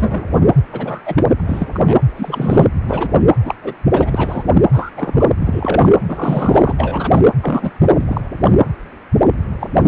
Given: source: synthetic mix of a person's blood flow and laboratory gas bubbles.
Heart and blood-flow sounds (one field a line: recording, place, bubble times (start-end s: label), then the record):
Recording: Doppler ultrasound of blood flow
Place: precordium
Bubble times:
0.00-0.51 s: bubbles
0.72-1.03 s: bubbles
1.05-1.35 s: bubbles
1.39-1.41 s: bubbles
1.46-1.70 s: bubbles
1.73-1.98 s: bubbles
2.16-2.67 s: bubbles
2.87-3.20 s: bubbles
3.43-3.55 s: bubbles
3.63-3.74 s: bubbles
3.92-4.44 s: bubbles
4.53-4.62 s: bubbles
4.72-4.91 s: bubbles
4.96-5.25 s: bubbles
5.40-5.92 s: bubbles
6.08-6.73 s: bubbles
6.77-7.21 s: bubbles
7.41-7.70 s: bubbles
7.83-8.04 s: bubbles
8.07-8.21 s: bubbles
8.43-8.51 s: bubbles
9.60-9.68 s: bubbles
9.74-9.88 s: bubbles
From the record:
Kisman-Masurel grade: 233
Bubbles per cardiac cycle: several, 3 to 8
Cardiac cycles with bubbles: 50 to 99%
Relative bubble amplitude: loud (0.450 to 0.775)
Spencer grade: 3 (all of the cardiac periods contain showers or single bubble signals, but not dominating or overriding the cardiac motion signals)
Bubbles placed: anywhere in the cardiac cycle